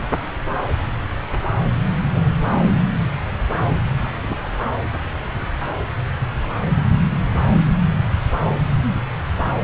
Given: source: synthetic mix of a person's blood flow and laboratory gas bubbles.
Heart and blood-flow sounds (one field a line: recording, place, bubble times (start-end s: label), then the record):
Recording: Doppler ultrasound of blood flow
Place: subclavian vein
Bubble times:
2.13-2.32 s: bubbles
2.42-2.63 s: bubbles
2.73-2.77 s: bubbles
4.04-4.08 s: bubbles
4.22-4.38 s: bubbles
4.43-4.53 s: bubbles
From the record:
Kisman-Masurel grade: 221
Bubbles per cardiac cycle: several, 3 to 8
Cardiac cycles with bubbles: 10 to 50%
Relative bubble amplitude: barely perceptible (0.100 to 0.250)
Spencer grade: 2 (many but less than half of the cardiac periods contain bubble signals, singularly or in groups)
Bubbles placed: anywhere in the cardiac cycle